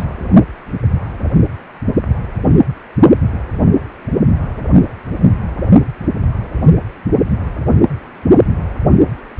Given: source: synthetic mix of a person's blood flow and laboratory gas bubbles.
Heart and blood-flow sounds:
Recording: Doppler ultrasound of blood flow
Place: precordium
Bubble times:
0.00-0.04 s: bubbles
From the record:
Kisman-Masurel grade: 212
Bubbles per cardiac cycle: several, 3 to 8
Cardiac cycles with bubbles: 1 to 10%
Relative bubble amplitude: moderate (0.250 to 0.450)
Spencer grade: 1 (occasional bubble signal discernible with the cardiac motion signal, with majority of cardiac periods free of bubbles)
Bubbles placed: only in the low amplitude regions of the cardiac cycle

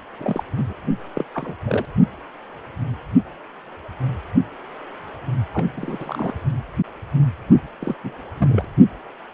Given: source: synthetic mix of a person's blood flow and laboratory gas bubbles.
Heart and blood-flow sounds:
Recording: Doppler ultrasound of blood flow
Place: precordium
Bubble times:
0.19-0.43 s: bubbles
0.56-0.73 s: bubbles
1.16-1.25 s: bubbles
1.34-1.55 s: bubbles
1.65-1.85 s: bubbles
5.53-5.65 s: bubbles
5.77-6.33 s: bubbles
7.80-7.95 s: bubbles
8.04-8.19 s: bubbles
8.37-8.64 s: bubbles
From the record:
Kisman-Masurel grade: 222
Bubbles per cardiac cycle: several, 3 to 8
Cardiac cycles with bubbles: 10 to 50%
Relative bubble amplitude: moderate (0.250 to 0.450)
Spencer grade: 2 (many but less than half of the cardiac periods contain bubble signals, singularly or in groups)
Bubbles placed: only in the low amplitude regions of the cardiac cycle

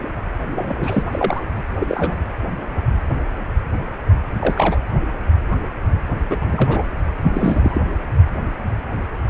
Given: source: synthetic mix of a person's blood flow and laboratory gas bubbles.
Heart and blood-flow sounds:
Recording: Doppler ultrasound of blood flow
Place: precordium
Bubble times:
0.54-1.04 s: bubbles
1.11-1.43 s: bubbles
1.80-2.17 s: bubbles
4.39-4.79 s: bubbles
6.29-6.83 s: bubbles
7.33-7.81 s: bubbles
From the record:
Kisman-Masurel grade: 223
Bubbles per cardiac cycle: several, 3 to 8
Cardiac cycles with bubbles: 10 to 50%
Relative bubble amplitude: loud (0.450 to 0.775)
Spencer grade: 2 (many but less than half of the cardiac periods contain bubble signals, singularly or in groups)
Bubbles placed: anywhere in the cardiac cycle

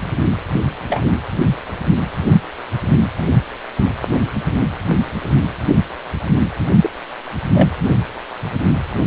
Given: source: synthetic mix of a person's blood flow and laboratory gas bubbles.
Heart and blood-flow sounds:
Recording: Doppler ultrasound of blood flow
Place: precordium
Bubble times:
0.88-1.13 s: bubbles
6.81-6.90 s: bubbles
7.54-7.69 s: bubbles
From the record:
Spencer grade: 2 (many but less than half of the cardiac periods contain bubble signals, singularly or in groups)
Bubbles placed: anywhere in the cardiac cycle

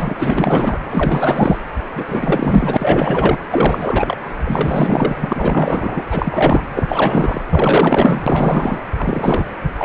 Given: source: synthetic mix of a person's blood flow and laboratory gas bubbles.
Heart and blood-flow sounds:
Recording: Doppler ultrasound of blood flow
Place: precordium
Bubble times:
0.00-0.16 s: bubbles
0.19-0.79 s: bubbles
0.90-1.59 s: bubbles
1.95-2.04 s: bubbles
2.06-3.38 s: bubbles
3.50-4.17 s: bubbles
4.44-6.04 s: bubbles
6.10-6.62 s: bubbles
6.75-7.42 s: bubbles
7.49-8.80 s: bubbles
8.98-9.46 s: bubbles
9.77-9.85 s: bubbles
From the record:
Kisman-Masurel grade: 444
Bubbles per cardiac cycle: continuous sound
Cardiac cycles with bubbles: 100%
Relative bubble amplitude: maximal (0.775 to 0.999)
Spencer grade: 4 (maximum detectable bubble signal sounding continuously throughout systole and diastole of every cardiac period, and overriding the amplitude of the normal cardiac signals)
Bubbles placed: anywhere in the cardiac cycle

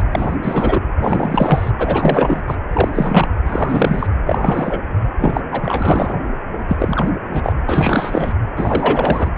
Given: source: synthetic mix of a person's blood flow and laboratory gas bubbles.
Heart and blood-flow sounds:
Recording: Doppler ultrasound of blood flow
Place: precordium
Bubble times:
0.11-0.38 s: bubbles
0.42-0.81 s: bubbles
0.99-1.71 s: bubbles
1.77-2.41 s: bubbles
2.47-2.57 s: bubbles
2.71-3.27 s: bubbles
3.46-4.07 s: bubbles
4.25-4.79 s: bubbles
5.20-5.41 s: bubbles
5.51-6.16 s: bubbles
6.68-7.11 s: bubbles
7.33-7.53 s: bubbles
7.66-8.35 s: bubbles
8.56-9.29 s: bubbles
From the record:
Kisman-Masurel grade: 343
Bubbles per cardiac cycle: rolling drumbeat, 9 or more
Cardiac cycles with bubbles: 100%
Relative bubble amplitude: loud (0.450 to 0.775)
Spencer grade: 3 (all of the cardiac periods contain showers or single bubble signals, but not dominating or overriding the cardiac motion signals)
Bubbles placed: anywhere in the cardiac cycle

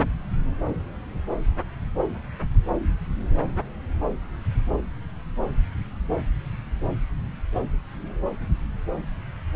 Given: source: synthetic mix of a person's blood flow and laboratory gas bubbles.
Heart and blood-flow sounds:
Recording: Doppler ultrasound of blood flow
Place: subclavian vein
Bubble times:
no bubbles
From the record:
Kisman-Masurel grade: 000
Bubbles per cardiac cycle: 0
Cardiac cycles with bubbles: 0%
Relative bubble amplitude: no bubbles discernible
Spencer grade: 0 (complete lack of bubble signals)

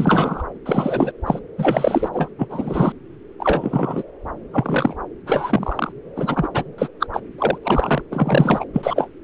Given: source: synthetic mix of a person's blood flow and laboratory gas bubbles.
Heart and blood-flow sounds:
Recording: Doppler ultrasound of blood flow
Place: subclavian vein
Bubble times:
0.00-0.43 s: bubbles
0.65-1.11 s: bubbles
1.26-1.40 s: bubbles
1.58-2.10 s: bubbles
2.12-2.28 s: bubbles
2.38-2.92 s: bubbles
3.40-4.03 s: bubbles
4.53-4.96 s: bubbles
5.26-5.93 s: bubbles
6.16-6.49 s: bubbles
6.54-6.63 s: bubbles
6.78-6.88 s: bubbles
7.00-7.07 s: bubbles
7.13-7.22 s: bubbles
7.38-7.58 s: bubbles
7.64-8.02 s: bubbles
8.12-8.64 s: bubbles
8.72-9.08 s: bubbles
From the record:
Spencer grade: 3 (all of the cardiac periods contain showers or single bubble signals, but not dominating or overriding the cardiac motion signals)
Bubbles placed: anywhere in the cardiac cycle

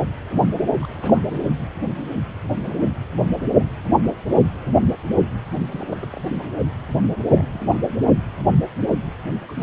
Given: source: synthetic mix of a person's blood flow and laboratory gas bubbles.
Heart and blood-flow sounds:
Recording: Doppler ultrasound of blood flow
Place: precordium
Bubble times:
0.80-1.25 s: bubbles
5.71-6.47 s: bubbles
6.60-6.69 s: bubbles
7.33-7.47 s: bubbles
7.53-7.95 s: bubbles
9.48-9.52 s: bubbles
9.57-9.63 s: bubbles
From the record:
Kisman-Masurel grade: 221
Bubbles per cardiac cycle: several, 3 to 8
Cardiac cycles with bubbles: 10 to 50%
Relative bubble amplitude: barely perceptible (0.100 to 0.250)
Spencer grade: 2 (many but less than half of the cardiac periods contain bubble signals, singularly or in groups)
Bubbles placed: anywhere in the cardiac cycle

